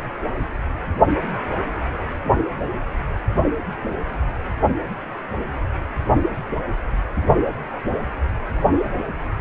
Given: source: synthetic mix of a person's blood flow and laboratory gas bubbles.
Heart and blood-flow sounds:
Doppler ultrasound of blood flow; precordium
no bubbles
From the record:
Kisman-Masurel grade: 000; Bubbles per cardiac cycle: 0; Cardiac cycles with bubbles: 0%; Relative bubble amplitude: no bubbles discernible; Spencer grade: 0 (complete lack of bubble signals)

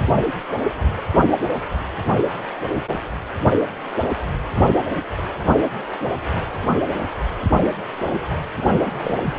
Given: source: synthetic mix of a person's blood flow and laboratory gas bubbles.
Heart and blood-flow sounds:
Doppler ultrasound of blood flow; precordium
8.57-8.66 s: bubbles
8.75-8.82 s: bubbles
8.85-9.34 s: bubbles
From the record:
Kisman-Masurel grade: 211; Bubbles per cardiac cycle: several, 3 to 8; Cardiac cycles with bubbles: 1 to 10%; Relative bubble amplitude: barely perceptible (0.100 to 0.250); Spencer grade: 1 (occasional bubble signal discernible with the cardiac motion signal, with majority of cardiac periods free of bubbles); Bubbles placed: anywhere in the cardiac cycle

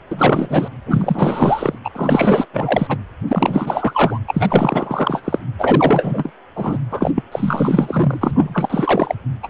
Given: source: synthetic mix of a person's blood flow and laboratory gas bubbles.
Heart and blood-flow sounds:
Doppler ultrasound of blood flow; precordium
0.11-0.69 s: bubbles
0.85-1.78 s: bubbles
1.84-1.90 s: bubbles
1.95-2.46 s: bubbles
2.53-2.98 s: bubbles
3.28-4.19 s: bubbles
4.28-5.22 s: bubbles
5.25-5.39 s: bubbles
5.58-6.32 s: bubbles
6.56-6.78 s: bubbles
6.91-7.11 s: bubbles
7.15-7.23 s: bubbles
7.32-9.15 s: bubbles
9.42-9.48 s: bubbles
From the record:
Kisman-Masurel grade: 444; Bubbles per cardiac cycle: continuous sound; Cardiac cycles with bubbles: 100%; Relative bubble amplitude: maximal (0.775 to 0.999); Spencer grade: 4 (maximum detectable bubble signal sounding continuously throughout systole and diastole of every cardiac period, and overriding the amplitude of the normal cardiac signals); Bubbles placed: anywhere in the cardiac cycle

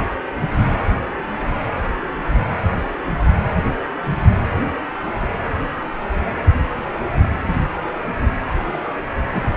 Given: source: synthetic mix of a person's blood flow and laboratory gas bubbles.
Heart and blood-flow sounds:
Doppler ultrasound of blood flow; precordium
8.72-8.79 s: bubbles
8.82-8.98 s: bubbles
9.31-9.51 s: bubbles
From the record:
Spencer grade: 2 (many but less than half of the cardiac periods contain bubble signals, singularly or in groups); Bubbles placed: anywhere in the cardiac cycle

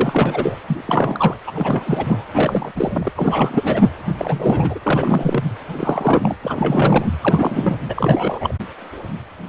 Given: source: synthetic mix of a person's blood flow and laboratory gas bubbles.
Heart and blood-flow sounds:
Doppler ultrasound of blood flow; precordium
0.00-0.57 s: bubbles
0.67-0.82 s: bubbles
0.87-1.36 s: bubbles
1.47-2.25 s: bubbles
2.33-2.72 s: bubbles
2.76-3.11 s: bubbles
3.16-3.89 s: bubbles
4.09-4.80 s: bubbles
4.86-5.44 s: bubbles
5.73-6.37 s: bubbles
6.42-7.07 s: bubbles
7.21-7.79 s: bubbles
7.89-8.54 s: bubbles
From the record:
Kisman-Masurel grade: 332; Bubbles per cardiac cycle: rolling drumbeat, 9 or more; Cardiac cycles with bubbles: 50 to 99%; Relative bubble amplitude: moderate (0.250 to 0.450); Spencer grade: 3 (all of the cardiac periods contain showers or single bubble signals, but not dominating or overriding the cardiac motion signals); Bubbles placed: anywhere in the cardiac cycle

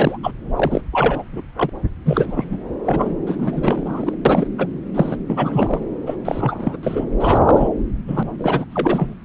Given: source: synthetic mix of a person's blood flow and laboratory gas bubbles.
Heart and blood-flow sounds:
Doppler ultrasound of blood flow; subclavian vein
0.00-0.18 s: bubbles
0.23-0.32 s: bubbles
0.57-0.82 s: bubbles
0.92-1.25 s: bubbles
1.32-1.41 s: bubbles
1.56-1.70 s: bubbles
2.05-2.58 s: bubbles
2.85-3.13 s: bubbles
3.26-4.15 s: bubbles
4.25-4.49 s: bubbles
4.58-4.67 s: bubbles
4.94-5.17 s: bubbles
5.27-5.79 s: bubbles
6.06-6.16 s: bubbles
6.25-6.77 s: bubbles
6.83-7.05 s: bubbles
7.19-7.68 s: bubbles
8.08-8.23 s: bubbles
8.38-8.65 s: bubbles
8.71-9.14 s: bubbles
From the record:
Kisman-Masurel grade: 343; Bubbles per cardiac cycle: rolling drumbeat, 9 or more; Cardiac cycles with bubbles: 100%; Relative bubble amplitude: loud (0.450 to 0.775); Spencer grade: 3 (all of the cardiac periods contain showers or single bubble signals, but not dominating or overriding the cardiac motion signals); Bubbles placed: anywhere in the cardiac cycle

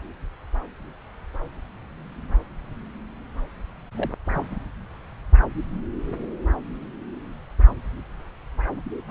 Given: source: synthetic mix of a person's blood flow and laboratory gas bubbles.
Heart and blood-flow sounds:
Doppler ultrasound of blood flow; subclavian vein
3.97-4.13 s: bubbles
4.25-4.46 s: bubbles
From the record:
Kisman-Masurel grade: 121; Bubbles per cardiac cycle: 1 to 2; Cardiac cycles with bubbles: 10 to 50%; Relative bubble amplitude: barely perceptible (0.100 to 0.250); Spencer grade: 2 (many but less than half of the cardiac periods contain bubble signals, singularly or in groups); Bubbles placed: anywhere in the cardiac cycle

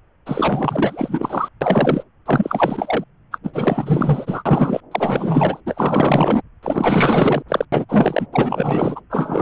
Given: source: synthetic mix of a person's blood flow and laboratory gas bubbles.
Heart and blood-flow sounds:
Doppler ultrasound of blood flow; subclavian vein
0.26-1.48 s: bubbles
1.61-2.04 s: bubbles
2.25-3.04 s: bubbles
3.31-3.38 s: bubbles
3.44-4.43 s: bubbles
4.46-4.80 s: bubbles
4.91-5.60 s: bubbles
5.66-6.42 s: bubbles
6.62-7.42 s: bubbles
7.48-7.65 s: bubbles
7.72-7.85 s: bubbles
7.89-8.27 s: bubbles
8.32-9.00 s: bubbles
9.10-9.42 s: bubbles
From the record:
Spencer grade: 4 (maximum detectable bubble signal sounding continuously throughout systole and diastole of every cardiac period, and overriding the amplitude of the normal cardiac signals); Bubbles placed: anywhere in the cardiac cycle

